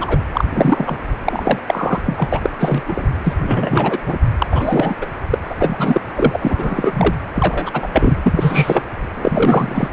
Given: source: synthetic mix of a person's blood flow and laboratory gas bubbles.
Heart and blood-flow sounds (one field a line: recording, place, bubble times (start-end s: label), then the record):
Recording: Doppler ultrasound of blood flow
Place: precordium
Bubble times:
0.00-0.19 s: bubbles
0.33-0.45 s: bubbles
0.50-0.97 s: bubbles
1.25-1.58 s: bubbles
1.68-2.03 s: bubbles
2.05-2.28 s: bubbles
2.32-2.50 s: bubbles
2.60-2.82 s: bubbles
2.88-3.07 s: bubbles
3.24-3.33 s: bubbles
3.41-3.98 s: bubbles
4.06-4.20 s: bubbles
4.38-4.46 s: bubbles
4.51-4.95 s: bubbles
5.01-5.07 s: bubbles
5.30-5.38 s: bubbles
5.50-5.55 s: bubbles
5.58-6.01 s: bubbles
6.15-7.15 s: bubbles
7.34-7.88 s: bubbles
7.92-8.16 s: bubbles
8.22-8.82 s: bubbles
9.13-9.88 s: bubbles
From the record:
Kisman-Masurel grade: 343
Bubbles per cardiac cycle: rolling drumbeat, 9 or more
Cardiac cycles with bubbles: 100%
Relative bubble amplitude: loud (0.450 to 0.775)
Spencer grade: 3 (all of the cardiac periods contain showers or single bubble signals, but not dominating or overriding the cardiac motion signals)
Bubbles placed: anywhere in the cardiac cycle